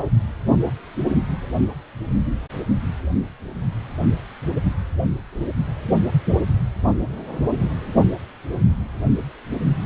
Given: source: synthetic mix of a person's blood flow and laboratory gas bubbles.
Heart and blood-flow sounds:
Doppler ultrasound of blood flow; precordium
no bubbles
From the record:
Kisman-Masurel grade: 000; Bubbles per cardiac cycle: 0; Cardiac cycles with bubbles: 0%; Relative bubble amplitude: no bubbles discernible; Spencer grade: 0 (complete lack of bubble signals)

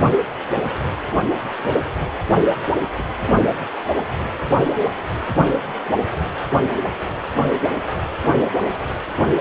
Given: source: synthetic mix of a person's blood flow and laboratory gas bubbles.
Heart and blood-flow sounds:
Doppler ultrasound of blood flow; precordium
2.34-2.55 s: bubbles
2.98-3.03 s: bubbles
From the record:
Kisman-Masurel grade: 112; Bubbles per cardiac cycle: 1 to 2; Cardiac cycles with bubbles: 1 to 10%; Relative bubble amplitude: moderate (0.250 to 0.450); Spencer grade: 1 (occasional bubble signal discernible with the cardiac motion signal, with majority of cardiac periods free of bubbles); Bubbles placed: anywhere in the cardiac cycle

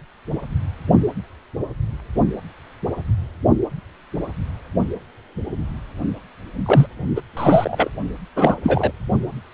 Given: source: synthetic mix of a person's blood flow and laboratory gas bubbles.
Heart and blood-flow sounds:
Doppler ultrasound of blood flow; precordium
6.65-6.87 s: bubbles
7.15-7.21 s: bubbles
7.36-7.88 s: bubbles
8.36-8.56 s: bubbles
8.63-8.91 s: bubbles
From the record:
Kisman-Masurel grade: 223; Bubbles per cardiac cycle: several, 3 to 8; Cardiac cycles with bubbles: 10 to 50%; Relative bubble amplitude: loud (0.450 to 0.775); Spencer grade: 2 (many but less than half of the cardiac periods contain bubble signals, singularly or in groups); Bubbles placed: only in the low amplitude regions of the cardiac cycle

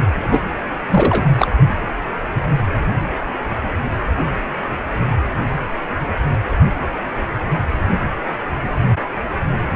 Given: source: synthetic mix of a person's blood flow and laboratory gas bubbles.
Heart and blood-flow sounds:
Doppler ultrasound of blood flow; precordium
0.31-0.40 s: bubbles
0.90-1.31 s: bubbles
1.36-1.48 s: bubbles
From the record:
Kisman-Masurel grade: 223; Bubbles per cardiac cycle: several, 3 to 8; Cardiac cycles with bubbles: 10 to 50%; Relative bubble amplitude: loud (0.450 to 0.775); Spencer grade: 2 (many but less than half of the cardiac periods contain bubble signals, singularly or in groups); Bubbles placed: anywhere in the cardiac cycle

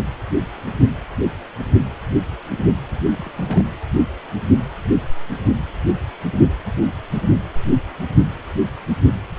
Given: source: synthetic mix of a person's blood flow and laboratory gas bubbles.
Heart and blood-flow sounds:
Doppler ultrasound of blood flow; precordium
3.08-3.31 s: bubbles
3.36-3.64 s: bubbles
From the record:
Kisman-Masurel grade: 221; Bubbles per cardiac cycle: several, 3 to 8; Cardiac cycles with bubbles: 10 to 50%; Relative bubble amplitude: barely perceptible (0.100 to 0.250); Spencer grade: 2 (many but less than half of the cardiac periods contain bubble signals, singularly or in groups); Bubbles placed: anywhere in the cardiac cycle

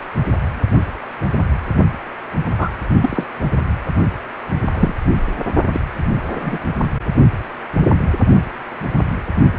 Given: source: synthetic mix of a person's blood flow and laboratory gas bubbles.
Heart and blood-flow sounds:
Doppler ultrasound of blood flow; precordium
2.58-2.69 s: bubbles
3.02-3.24 s: bubbles
4.74-4.94 s: bubbles
5.73-5.81 s: bubbles
6.32-6.59 s: bubbles
From the record:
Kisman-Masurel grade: 123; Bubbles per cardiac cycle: 1 to 2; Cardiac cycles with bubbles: 10 to 50%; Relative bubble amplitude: loud (0.450 to 0.775); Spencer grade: 2 (many but less than half of the cardiac periods contain bubble signals, singularly or in groups); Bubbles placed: only in the low amplitude regions of the cardiac cycle

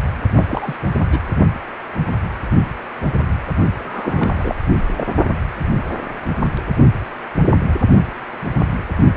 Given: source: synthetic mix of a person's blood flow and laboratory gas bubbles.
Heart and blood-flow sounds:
Doppler ultrasound of blood flow; precordium
0.36-0.45 s: bubbles
0.48-0.76 s: bubbles
1.11-1.19 s: bubbles
3.79-4.55 s: bubbles
4.96-5.04 s: bubbles
From the record:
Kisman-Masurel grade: 222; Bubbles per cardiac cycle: several, 3 to 8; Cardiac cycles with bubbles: 10 to 50%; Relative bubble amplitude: moderate (0.250 to 0.450); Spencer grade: 2 (many but less than half of the cardiac periods contain bubble signals, singularly or in groups); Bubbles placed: only in the low amplitude regions of the cardiac cycle

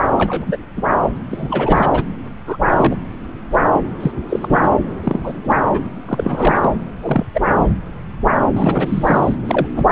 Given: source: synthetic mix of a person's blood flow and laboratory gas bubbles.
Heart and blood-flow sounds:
Doppler ultrasound of blood flow; subclavian vein
0.18-0.57 s: bubbles
0.76-0.82 s: bubbles
1.28-2.04 s: bubbles
2.47-2.57 s: bubbles
2.68-2.98 s: bubbles
3.51-3.59 s: bubbles
3.73-3.81 s: bubbles
4.00-4.12 s: bubbles
4.29-4.69 s: bubbles
5.04-5.56 s: bubbles
5.70-5.79 s: bubbles
6.07-6.71 s: bubbles
7.02-7.25 s: bubbles
7.33-7.42 s: bubbles
7.49-7.65 s: bubbles
8.35-9.39 s: bubbles
9.47-9.66 s: bubbles
9.76-9.91 s: bubbles
From the record:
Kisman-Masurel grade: 242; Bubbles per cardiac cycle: several, 3 to 8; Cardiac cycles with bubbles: 100%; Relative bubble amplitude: moderate (0.250 to 0.450); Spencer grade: 3 (all of the cardiac periods contain showers or single bubble signals, but not dominating or overriding the cardiac motion signals); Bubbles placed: anywhere in the cardiac cycle

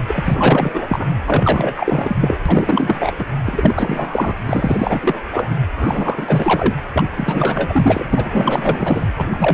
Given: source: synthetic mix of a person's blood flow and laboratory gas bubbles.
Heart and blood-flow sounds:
Doppler ultrasound of blood flow; precordium
0.07-1.06 s: bubbles
1.26-2.15 s: bubbles
2.20-2.36 s: bubbles
2.46-3.12 s: bubbles
3.19-3.25 s: bubbles
3.44-4.35 s: bubbles
4.46-5.21 s: bubbles
5.31-5.56 s: bubbles
5.77-6.77 s: bubbles
6.93-7.04 s: bubbles
7.17-8.04 s: bubbles
8.09-9.13 s: bubbles
9.16-9.54 s: bubbles
From the record:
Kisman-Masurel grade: 444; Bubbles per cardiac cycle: continuous sound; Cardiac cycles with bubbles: 100%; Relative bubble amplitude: maximal (0.775 to 0.999); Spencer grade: 4 (maximum detectable bubble signal sounding continuously throughout systole and diastole of every cardiac period, and overriding the amplitude of the normal cardiac signals); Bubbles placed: anywhere in the cardiac cycle

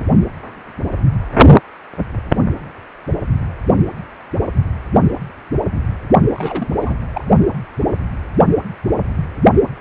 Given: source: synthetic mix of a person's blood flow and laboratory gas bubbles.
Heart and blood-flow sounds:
Doppler ultrasound of blood flow; precordium
6.35-6.79 s: bubbles
6.81-6.96 s: bubbles
7.12-7.25 s: bubbles
From the record:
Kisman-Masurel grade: 212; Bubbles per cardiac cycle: several, 3 to 8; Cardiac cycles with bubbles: 1 to 10%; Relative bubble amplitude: moderate (0.250 to 0.450); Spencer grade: 1 (occasional bubble signal discernible with the cardiac motion signal, with majority of cardiac periods free of bubbles); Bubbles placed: only in the low amplitude regions of the cardiac cycle

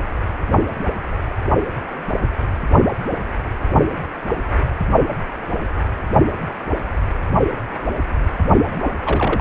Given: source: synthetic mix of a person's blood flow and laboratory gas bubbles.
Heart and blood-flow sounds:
Doppler ultrasound of blood flow; precordium
8.65-8.94 s: bubbles
9.05-9.41 s: bubbles
From the record:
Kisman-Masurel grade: 212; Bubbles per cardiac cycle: several, 3 to 8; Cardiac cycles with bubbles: 1 to 10%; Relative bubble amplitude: moderate (0.250 to 0.450); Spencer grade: 1 (occasional bubble signal discernible with the cardiac motion signal, with majority of cardiac periods free of bubbles); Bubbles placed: only in the low amplitude regions of the cardiac cycle

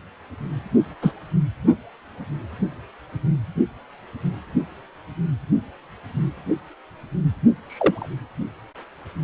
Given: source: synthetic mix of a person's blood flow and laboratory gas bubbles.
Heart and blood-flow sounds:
Doppler ultrasound of blood flow; precordium
1.01-1.12 s: bubbles
7.67-8.08 s: bubbles
From the record:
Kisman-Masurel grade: 123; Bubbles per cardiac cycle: 1 to 2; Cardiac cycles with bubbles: 10 to 50%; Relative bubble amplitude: loud (0.450 to 0.775); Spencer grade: 2 (many but less than half of the cardiac periods contain bubble signals, singularly or in groups); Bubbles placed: only in the low amplitude regions of the cardiac cycle

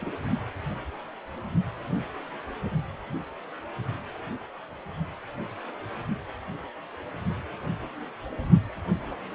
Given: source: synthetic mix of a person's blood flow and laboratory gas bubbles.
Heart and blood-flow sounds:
Doppler ultrasound of blood flow; precordium
0.00-0.12 s: bubbles
From the record:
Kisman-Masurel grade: 211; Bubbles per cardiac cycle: several, 3 to 8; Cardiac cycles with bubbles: 1 to 10%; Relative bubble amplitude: barely perceptible (0.100 to 0.250); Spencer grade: 1 (occasional bubble signal discernible with the cardiac motion signal, with majority of cardiac periods free of bubbles); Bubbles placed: anywhere in the cardiac cycle

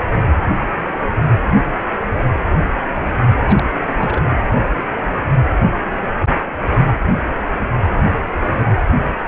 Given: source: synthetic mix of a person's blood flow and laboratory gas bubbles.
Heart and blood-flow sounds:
Doppler ultrasound of blood flow; precordium
3.40-3.64 s: bubbles
3.99-4.31 s: bubbles
From the record:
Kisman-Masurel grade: 211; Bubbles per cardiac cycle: several, 3 to 8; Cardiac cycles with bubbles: 1 to 10%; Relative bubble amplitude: barely perceptible (0.100 to 0.250); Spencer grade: 1 (occasional bubble signal discernible with the cardiac motion signal, with majority of cardiac periods free of bubbles); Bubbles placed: anywhere in the cardiac cycle

